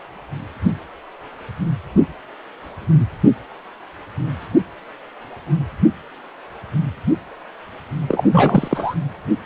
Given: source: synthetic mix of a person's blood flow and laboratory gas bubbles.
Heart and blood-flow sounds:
Doppler ultrasound of blood flow; precordium
8.08-8.95 s: bubbles
From the record:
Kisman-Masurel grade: 213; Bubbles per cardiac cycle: several, 3 to 8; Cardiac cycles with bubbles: 1 to 10%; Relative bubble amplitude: loud (0.450 to 0.775); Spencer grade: 1 (occasional bubble signal discernible with the cardiac motion signal, with majority of cardiac periods free of bubbles); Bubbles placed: anywhere in the cardiac cycle

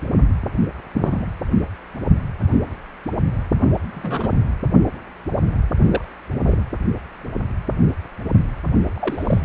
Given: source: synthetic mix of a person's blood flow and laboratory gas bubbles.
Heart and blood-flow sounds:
Doppler ultrasound of blood flow; precordium
0.94-1.25 s: bubbles
3.93-4.39 s: bubbles
5.84-6.04 s: bubbles
6.43-6.63 s: bubbles
8.96-9.41 s: bubbles
From the record:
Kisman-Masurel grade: 122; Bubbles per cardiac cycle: 1 to 2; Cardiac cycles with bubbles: 10 to 50%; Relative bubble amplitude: moderate (0.250 to 0.450); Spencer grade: 2 (many but less than half of the cardiac periods contain bubble signals, singularly or in groups); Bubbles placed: anywhere in the cardiac cycle

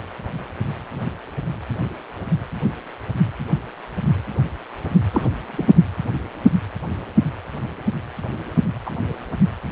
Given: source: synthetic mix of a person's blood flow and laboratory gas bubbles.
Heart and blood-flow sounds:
Doppler ultrasound of blood flow; precordium
5.13-5.26 s: bubbles
5.46-5.72 s: bubbles
8.86-8.91 s: bubbles
From the record:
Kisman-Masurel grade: 122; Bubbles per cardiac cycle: 1 to 2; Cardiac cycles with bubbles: 10 to 50%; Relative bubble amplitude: moderate (0.250 to 0.450); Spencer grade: 2 (many but less than half of the cardiac periods contain bubble signals, singularly or in groups); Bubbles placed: anywhere in the cardiac cycle

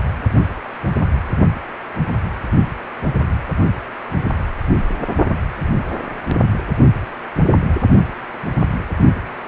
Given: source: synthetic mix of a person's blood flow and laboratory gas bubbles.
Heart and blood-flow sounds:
Doppler ultrasound of blood flow; precordium
no bubbles
From the record:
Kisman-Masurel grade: 000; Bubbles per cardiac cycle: 0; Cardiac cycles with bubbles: 0%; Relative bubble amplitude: no bubbles discernible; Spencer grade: 0 (complete lack of bubble signals)

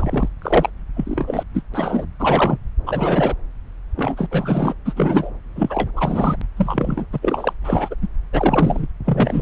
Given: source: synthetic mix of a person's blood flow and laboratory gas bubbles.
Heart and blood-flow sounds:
Doppler ultrasound of blood flow; subclavian vein
0.00-0.29 s: bubbles
0.42-0.69 s: bubbles
0.96-1.43 s: bubbles
1.54-1.62 s: bubbles
1.73-2.06 s: bubbles
2.19-2.58 s: bubbles
2.86-3.35 s: bubbles
3.96-4.26 s: bubbles
4.31-4.74 s: bubbles
4.85-4.93 s: bubbles
4.96-5.31 s: bubbles
5.55-5.91 s: bubbles
5.96-6.36 s: bubbles
6.56-7.06 s: bubbles
7.12-7.53 s: bubbles
7.64-7.96 s: bubbles
8.01-8.08 s: bubbles
8.32-8.88 s: bubbles
9.05-9.41 s: bubbles
From the record:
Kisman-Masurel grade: 243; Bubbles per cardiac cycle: several, 3 to 8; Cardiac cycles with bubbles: 100%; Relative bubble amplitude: loud (0.450 to 0.775); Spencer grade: 3 (all of the cardiac periods contain showers or single bubble signals, but not dominating or overriding the cardiac motion signals); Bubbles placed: anywhere in the cardiac cycle

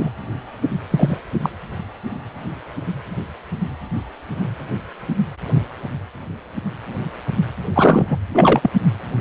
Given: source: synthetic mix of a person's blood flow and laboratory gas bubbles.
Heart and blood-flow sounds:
Doppler ultrasound of blood flow; precordium
0.00-0.10 s: bubbles
0.90-1.17 s: bubbles
1.42-1.50 s: bubbles
7.75-8.17 s: bubbles
8.34-8.71 s: bubbles
From the record:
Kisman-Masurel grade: 223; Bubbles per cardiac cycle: several, 3 to 8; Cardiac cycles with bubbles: 10 to 50%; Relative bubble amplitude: loud (0.450 to 0.775); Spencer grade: 2 (many but less than half of the cardiac periods contain bubble signals, singularly or in groups); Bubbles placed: anywhere in the cardiac cycle

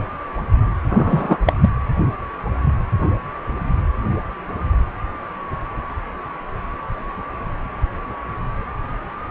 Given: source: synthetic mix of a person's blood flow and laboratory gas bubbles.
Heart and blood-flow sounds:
Doppler ultrasound of blood flow; precordium
0.89-1.38 s: bubbles
1.46-1.53 s: bubbles
1.61-1.69 s: bubbles
From the record:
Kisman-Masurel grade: 213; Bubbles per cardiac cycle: several, 3 to 8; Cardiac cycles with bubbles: 1 to 10%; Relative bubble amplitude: loud (0.450 to 0.775); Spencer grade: 1 (occasional bubble signal discernible with the cardiac motion signal, with majority of cardiac periods free of bubbles); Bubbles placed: anywhere in the cardiac cycle

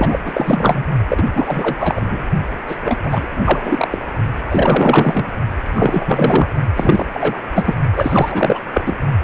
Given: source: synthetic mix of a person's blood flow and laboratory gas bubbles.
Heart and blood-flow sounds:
Doppler ultrasound of blood flow; precordium
0.00-0.20 s: bubbles
0.25-0.84 s: bubbles
1.08-1.24 s: bubbles
1.32-1.76 s: bubbles
1.80-2.23 s: bubbles
2.67-2.76 s: bubbles
2.83-2.98 s: bubbles
3.03-4.03 s: bubbles
4.50-5.29 s: bubbles
5.65-6.50 s: bubbles
6.76-7.06 s: bubbles
7.14-7.40 s: bubbles
7.55-7.75 s: bubbles
7.96-8.61 s: bubbles
8.71-8.81 s: bubbles
8.86-8.95 s: bubbles
From the record:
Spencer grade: 4 (maximum detectable bubble signal sounding continuously throughout systole and diastole of every cardiac period, and overriding the amplitude of the normal cardiac signals); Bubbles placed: only in the low amplitude regions of the cardiac cycle

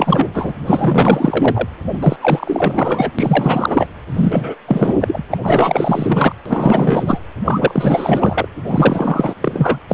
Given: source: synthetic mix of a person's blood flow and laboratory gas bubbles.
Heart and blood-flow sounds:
Doppler ultrasound of blood flow; precordium
0.00-0.55 s: bubbles
0.65-1.67 s: bubbles
1.93-2.16 s: bubbles
2.21-3.10 s: bubbles
3.19-3.87 s: bubbles
4.13-4.55 s: bubbles
4.67-4.95 s: bubbles
5.00-5.22 s: bubbles
5.30-5.38 s: bubbles
5.42-6.36 s: bubbles
6.46-7.21 s: bubbles
7.45-8.46 s: bubbles
8.67-9.34 s: bubbles
9.40-9.79 s: bubbles
9.89-9.94 s: bubbles
From the record:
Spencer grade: 4 (maximum detectable bubble signal sounding continuously throughout systole and diastole of every cardiac period, and overriding the amplitude of the normal cardiac signals); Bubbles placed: anywhere in the cardiac cycle

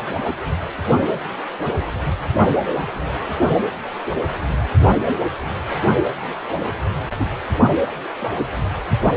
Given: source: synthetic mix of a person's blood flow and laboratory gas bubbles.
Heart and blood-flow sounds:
Doppler ultrasound of blood flow; precordium
2.75-3.07 s: bubbles
7.19-7.28 s: bubbles
From the record:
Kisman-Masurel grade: 121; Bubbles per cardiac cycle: 1 to 2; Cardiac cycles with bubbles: 10 to 50%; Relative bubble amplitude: barely perceptible (0.100 to 0.250); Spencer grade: 2 (many but less than half of the cardiac periods contain bubble signals, singularly or in groups); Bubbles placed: only in the low amplitude regions of the cardiac cycle

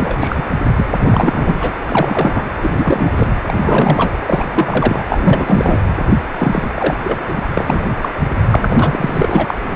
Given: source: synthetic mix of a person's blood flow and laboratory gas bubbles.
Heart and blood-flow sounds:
Doppler ultrasound of blood flow; precordium
0.00-0.43 s: bubbles
0.77-1.55 s: bubbles
1.60-1.72 s: bubbles
1.88-2.44 s: bubbles
2.62-3.11 s: bubbles
3.16-3.28 s: bubbles
3.48-3.54 s: bubbles
3.59-4.17 s: bubbles
4.27-4.43 s: bubbles
4.54-5.03 s: bubbles
5.09-5.80 s: bubbles
6.38-6.70 s: bubbles
6.76-6.97 s: bubbles
7.03-7.18 s: bubbles
7.27-7.42 s: bubbles
7.54-7.86 s: bubbles
8.01-8.09 s: bubbles
8.51-9.76 s: bubbles
From the record:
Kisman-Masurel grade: 343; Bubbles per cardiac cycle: rolling drumbeat, 9 or more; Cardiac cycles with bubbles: 100%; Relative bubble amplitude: loud (0.450 to 0.775); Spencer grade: 3 (all of the cardiac periods contain showers or single bubble signals, but not dominating or overriding the cardiac motion signals); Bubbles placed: anywhere in the cardiac cycle

